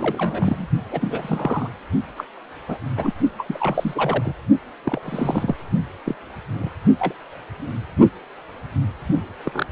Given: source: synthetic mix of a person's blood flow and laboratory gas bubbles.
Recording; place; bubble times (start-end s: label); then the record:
Doppler ultrasound of blood flow; precordium
0.00-0.66 s: bubbles
0.91-1.69 s: bubbles
2.17-2.25 s: bubbles
2.68-2.77 s: bubbles
2.96-3.13 s: bubbles
3.38-4.34 s: bubbles
4.83-5.54 s: bubbles
6.05-6.16 s: bubbles
6.58-6.71 s: bubbles
6.99-7.14 s: bubbles
9.45-9.66 s: bubbles
From the record:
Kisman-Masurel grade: 232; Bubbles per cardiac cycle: several, 3 to 8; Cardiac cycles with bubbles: 50 to 99%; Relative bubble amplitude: moderate (0.250 to 0.450); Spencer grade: 3 (all of the cardiac periods contain showers or single bubble signals, but not dominating or overriding the cardiac motion signals); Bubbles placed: only in the low amplitude regions of the cardiac cycle